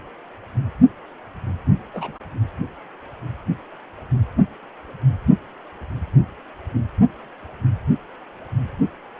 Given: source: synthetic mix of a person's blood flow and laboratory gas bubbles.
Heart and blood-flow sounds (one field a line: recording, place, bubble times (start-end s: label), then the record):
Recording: Doppler ultrasound of blood flow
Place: precordium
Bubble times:
1.94-2.18 s: bubbles
From the record:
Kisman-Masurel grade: 111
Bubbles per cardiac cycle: 1 to 2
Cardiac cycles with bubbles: 1 to 10%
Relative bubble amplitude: barely perceptible (0.100 to 0.250)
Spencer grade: 1 (occasional bubble signal discernible with the cardiac motion signal, with majority of cardiac periods free of bubbles)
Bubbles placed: only in the low amplitude regions of the cardiac cycle